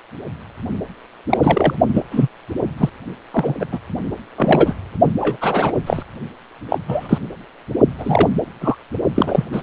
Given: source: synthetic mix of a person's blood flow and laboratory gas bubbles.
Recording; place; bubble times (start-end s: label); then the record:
Doppler ultrasound of blood flow; precordium
1.29-1.38 s: bubbles
1.42-1.75 s: bubbles
1.94-2.03 s: bubbles
2.10-2.27 s: bubbles
2.77-2.90 s: bubbles
3.33-3.54 s: bubbles
3.59-3.66 s: bubbles
3.72-3.79 s: bubbles
4.37-4.75 s: bubbles
5.20-5.37 s: bubbles
5.41-5.72 s: bubbles
5.86-6.03 s: bubbles
6.70-6.79 s: bubbles
6.87-7.19 s: bubbles
7.98-8.29 s: bubbles
8.61-8.76 s: bubbles
9.15-9.45 s: bubbles
9.52-9.62 s: bubbles
From the record:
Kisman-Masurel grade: 243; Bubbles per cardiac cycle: several, 3 to 8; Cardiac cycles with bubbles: 100%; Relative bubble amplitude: loud (0.450 to 0.775); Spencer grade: 3 (all of the cardiac periods contain showers or single bubble signals, but not dominating or overriding the cardiac motion signals); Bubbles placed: only in the low amplitude regions of the cardiac cycle